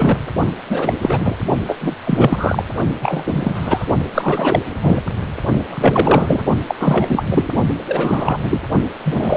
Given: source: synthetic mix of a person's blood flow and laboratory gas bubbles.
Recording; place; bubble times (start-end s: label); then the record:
Doppler ultrasound of blood flow; precordium
0.00-0.17 s: bubbles
0.70-0.94 s: bubbles
1.02-1.36 s: bubbles
1.67-1.77 s: bubbles
1.81-1.94 s: bubbles
2.04-2.65 s: bubbles
3.01-3.24 s: bubbles
3.27-3.86 s: bubbles
4.14-4.60 s: bubbles
4.81-5.02 s: bubbles
5.70-6.44 s: bubbles
6.67-6.74 s: bubbles
6.79-7.24 s: bubbles
7.30-7.48 s: bubbles
7.88-8.59 s: bubbles
9.04-9.37 s: bubbles
From the record:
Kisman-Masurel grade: 343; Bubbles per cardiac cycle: rolling drumbeat, 9 or more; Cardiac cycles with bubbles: 100%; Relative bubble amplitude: loud (0.450 to 0.775); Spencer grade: 3 (all of the cardiac periods contain showers or single bubble signals, but not dominating or overriding the cardiac motion signals); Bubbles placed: only in the low amplitude regions of the cardiac cycle